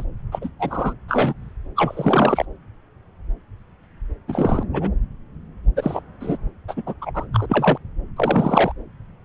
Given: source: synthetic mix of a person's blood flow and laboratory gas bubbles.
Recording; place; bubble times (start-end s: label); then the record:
Doppler ultrasound of blood flow; subclavian vein
0.00-0.04 s: bubbles
0.32-0.49 s: bubbles
0.59-0.94 s: bubbles
1.08-1.33 s: bubbles
1.76-2.45 s: bubbles
4.28-4.63 s: bubbles
4.73-4.89 s: bubbles
5.76-6.02 s: bubbles
6.20-6.38 s: bubbles
6.68-6.83 s: bubbles
6.86-6.95 s: bubbles
7.01-7.25 s: bubbles
7.33-7.78 s: bubbles
8.16-8.72 s: bubbles
From the record:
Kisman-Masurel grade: 233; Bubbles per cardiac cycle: several, 3 to 8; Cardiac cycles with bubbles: 50 to 99%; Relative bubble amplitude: loud (0.450 to 0.775); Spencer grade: 3 (all of the cardiac periods contain showers or single bubble signals, but not dominating or overriding the cardiac motion signals); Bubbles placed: anywhere in the cardiac cycle